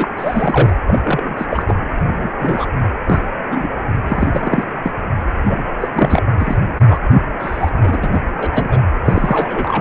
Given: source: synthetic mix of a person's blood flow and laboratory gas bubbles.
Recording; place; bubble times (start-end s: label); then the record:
Doppler ultrasound of blood flow; precordium
0.00-0.08 s: bubbles
0.16-0.76 s: bubbles
0.87-1.01 s: bubbles
1.04-1.47 s: bubbles
1.50-1.63 s: bubbles
1.68-1.75 s: bubbles
2.00-2.30 s: bubbles
2.40-2.66 s: bubbles
3.06-3.19 s: bubbles
3.50-3.67 s: bubbles
4.09-4.65 s: bubbles
4.83-4.92 s: bubbles
5.43-5.64 s: bubbles
5.80-5.88 s: bubbles
5.92-6.21 s: bubbles
6.38-6.57 s: bubbles
6.88-6.99 s: bubbles
7.08-7.21 s: bubbles
7.39-7.71 s: bubbles
7.83-8.11 s: bubbles
8.14-8.22 s: bubbles
8.37-8.81 s: bubbles
9.05-9.81 s: bubbles
From the record:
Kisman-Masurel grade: 243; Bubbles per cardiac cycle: several, 3 to 8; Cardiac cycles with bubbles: 100%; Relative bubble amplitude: loud (0.450 to 0.775); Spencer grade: 3 (all of the cardiac periods contain showers or single bubble signals, but not dominating or overriding the cardiac motion signals); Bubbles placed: anywhere in the cardiac cycle